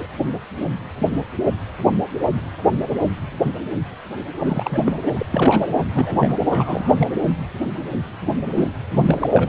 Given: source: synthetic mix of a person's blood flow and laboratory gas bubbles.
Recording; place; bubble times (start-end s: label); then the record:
Doppler ultrasound of blood flow; precordium
0.00-0.06 s: bubbles
4.38-4.94 s: bubbles
5.06-5.26 s: bubbles
5.30-5.67 s: bubbles
5.86-6.35 s: bubbles
6.50-7.13 s: bubbles
8.26-8.33 s: bubbles
8.54-8.67 s: bubbles
9.05-9.49 s: bubbles
From the record:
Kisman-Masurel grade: 332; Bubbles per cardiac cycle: rolling drumbeat, 9 or more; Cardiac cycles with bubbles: 50 to 99%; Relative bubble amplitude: moderate (0.250 to 0.450); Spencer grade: 3 (all of the cardiac periods contain showers or single bubble signals, but not dominating or overriding the cardiac motion signals); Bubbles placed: anywhere in the cardiac cycle